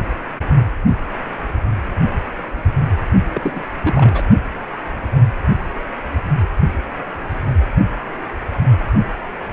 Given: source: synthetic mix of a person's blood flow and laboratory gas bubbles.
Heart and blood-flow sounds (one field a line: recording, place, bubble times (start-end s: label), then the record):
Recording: Doppler ultrasound of blood flow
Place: precordium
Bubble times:
3.29-3.64 s: bubbles
3.82-4.23 s: bubbles
From the record:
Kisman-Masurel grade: 222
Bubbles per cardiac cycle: several, 3 to 8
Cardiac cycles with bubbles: 10 to 50%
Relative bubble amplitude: moderate (0.250 to 0.450)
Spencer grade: 2 (many but less than half of the cardiac periods contain bubble signals, singularly or in groups)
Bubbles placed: only in the low amplitude regions of the cardiac cycle